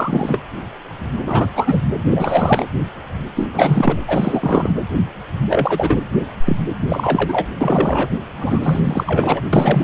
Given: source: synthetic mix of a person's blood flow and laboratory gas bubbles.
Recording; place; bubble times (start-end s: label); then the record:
Doppler ultrasound of blood flow; precordium
0.00-0.42 s: bubbles
1.26-1.49 s: bubbles
1.55-1.81 s: bubbles
2.10-2.66 s: bubbles
3.35-3.48 s: bubbles
3.54-3.97 s: bubbles
4.07-4.71 s: bubbles
5.49-6.05 s: bubbles
6.44-6.56 s: bubbles
6.88-7.47 s: bubbles
7.60-8.09 s: bubbles
8.37-9.41 s: bubbles
9.53-9.83 s: bubbles
From the record:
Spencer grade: 3 (all of the cardiac periods contain showers or single bubble signals, but not dominating or overriding the cardiac motion signals); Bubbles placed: anywhere in the cardiac cycle